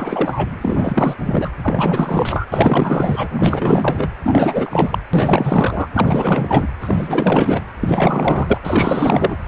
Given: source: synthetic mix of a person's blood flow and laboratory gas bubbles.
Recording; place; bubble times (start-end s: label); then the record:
Doppler ultrasound of blood flow; precordium
0.00-0.49 s: bubbles
0.61-1.15 s: bubbles
1.25-1.49 s: bubbles
1.62-2.46 s: bubbles
2.52-3.27 s: bubbles
3.31-4.08 s: bubbles
4.23-4.99 s: bubbles
5.13-5.88 s: bubbles
5.94-6.67 s: bubbles
6.81-7.64 s: bubbles
7.81-8.57 s: bubbles
8.64-9.38 s: bubbles
From the record:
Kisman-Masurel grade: 444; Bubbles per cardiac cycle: continuous sound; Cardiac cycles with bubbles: 100%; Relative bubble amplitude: maximal (0.775 to 0.999); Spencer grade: 4 (maximum detectable bubble signal sounding continuously throughout systole and diastole of every cardiac period, and overriding the amplitude of the normal cardiac signals); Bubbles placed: anywhere in the cardiac cycle